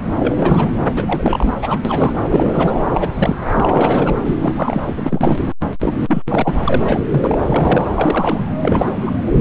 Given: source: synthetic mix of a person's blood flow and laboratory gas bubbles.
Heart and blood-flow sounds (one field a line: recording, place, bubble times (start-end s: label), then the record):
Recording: Doppler ultrasound of blood flow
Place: subclavian vein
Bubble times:
0.00-0.02 s: bubbles
0.19-0.76 s: bubbles
0.96-1.55 s: bubbles
1.61-1.80 s: bubbles
1.84-2.24 s: bubbles
2.29-2.76 s: bubbles
2.93-3.13 s: bubbles
3.16-3.36 s: bubbles
3.55-4.17 s: bubbles
4.25-5.37 s: bubbles
5.79-5.93 s: bubbles
6.00-6.23 s: bubbles
6.28-6.54 s: bubbles
6.64-7.04 s: bubbles
7.09-7.34 s: bubbles
7.42-7.91 s: bubbles
7.95-8.45 s: bubbles
8.62-9.20 s: bubbles
9.27-9.32 s: bubbles
9.38-9.41 s: bubbles
From the record:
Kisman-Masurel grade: 343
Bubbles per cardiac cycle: rolling drumbeat, 9 or more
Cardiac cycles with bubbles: 100%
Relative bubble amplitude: loud (0.450 to 0.775)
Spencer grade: 3 (all of the cardiac periods contain showers or single bubble signals, but not dominating or overriding the cardiac motion signals)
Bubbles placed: anywhere in the cardiac cycle